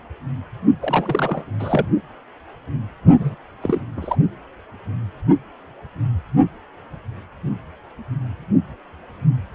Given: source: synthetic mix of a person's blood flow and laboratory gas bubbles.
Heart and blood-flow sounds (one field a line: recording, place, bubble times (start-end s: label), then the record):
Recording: Doppler ultrasound of blood flow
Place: precordium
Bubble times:
0.80-1.51 s: bubbles
1.59-1.91 s: bubbles
3.18-3.35 s: bubbles
3.61-3.81 s: bubbles
3.96-4.17 s: bubbles
From the record:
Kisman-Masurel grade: 222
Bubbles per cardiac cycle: several, 3 to 8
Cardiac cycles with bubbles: 10 to 50%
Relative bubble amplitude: moderate (0.250 to 0.450)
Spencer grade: 2 (many but less than half of the cardiac periods contain bubble signals, singularly or in groups)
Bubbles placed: only in the low amplitude regions of the cardiac cycle